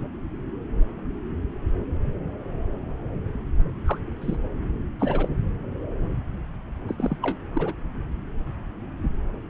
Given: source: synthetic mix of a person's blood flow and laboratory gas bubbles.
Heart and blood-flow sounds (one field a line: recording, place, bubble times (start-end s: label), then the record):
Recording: Doppler ultrasound of blood flow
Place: subclavian vein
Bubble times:
3.85-3.98 s: bubbles
4.21-4.37 s: bubbles
4.99-5.28 s: bubbles
6.88-6.94 s: bubbles
6.98-7.17 s: bubbles
7.22-7.36 s: bubbles
7.51-7.73 s: bubbles
From the record:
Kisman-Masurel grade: 221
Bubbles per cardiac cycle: several, 3 to 8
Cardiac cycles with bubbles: 10 to 50%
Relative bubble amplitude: barely perceptible (0.100 to 0.250)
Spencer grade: 2 (many but less than half of the cardiac periods contain bubble signals, singularly or in groups)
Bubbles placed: anywhere in the cardiac cycle